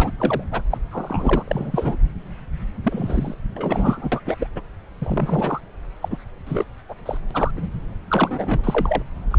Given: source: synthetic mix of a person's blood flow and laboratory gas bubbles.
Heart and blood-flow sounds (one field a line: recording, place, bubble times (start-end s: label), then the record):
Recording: Doppler ultrasound of blood flow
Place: subclavian vein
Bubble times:
0.00-0.11 s: bubbles
0.18-0.43 s: bubbles
0.51-0.61 s: bubbles
0.71-0.77 s: bubbles
0.92-1.43 s: bubbles
1.48-1.98 s: bubbles
2.83-3.35 s: bubbles
3.56-4.20 s: bubbles
4.25-4.36 s: bubbles
4.39-4.46 s: bubbles
4.55-4.61 s: bubbles
5.01-5.60 s: bubbles
5.83-5.85 s: bubbles
6.01-6.18 s: bubbles
6.46-6.65 s: bubbles
6.88-6.94 s: bubbles
7.05-7.17 s: bubbles
7.30-7.51 s: bubbles
7.55-7.69 s: bubbles
8.08-9.02 s: bubbles
9.30-9.39 s: bubbles
From the record:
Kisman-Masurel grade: 242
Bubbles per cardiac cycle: several, 3 to 8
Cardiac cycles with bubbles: 100%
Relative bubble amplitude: moderate (0.250 to 0.450)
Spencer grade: 3 (all of the cardiac periods contain showers or single bubble signals, but not dominating or overriding the cardiac motion signals)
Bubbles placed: anywhere in the cardiac cycle